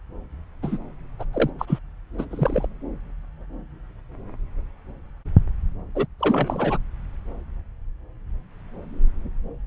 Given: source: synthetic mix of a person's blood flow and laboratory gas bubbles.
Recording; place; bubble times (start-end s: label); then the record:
Doppler ultrasound of blood flow; subclavian vein
0.62-0.78 s: bubbles
1.19-1.25 s: bubbles
1.33-1.50 s: bubbles
1.58-1.79 s: bubbles
2.18-2.25 s: bubbles
2.31-2.67 s: bubbles
5.95-6.06 s: bubbles
6.20-6.78 s: bubbles
From the record:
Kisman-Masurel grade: 222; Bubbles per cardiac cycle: several, 3 to 8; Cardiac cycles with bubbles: 10 to 50%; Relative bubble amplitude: moderate (0.250 to 0.450); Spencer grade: 2 (many but less than half of the cardiac periods contain bubble signals, singularly or in groups); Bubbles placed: anywhere in the cardiac cycle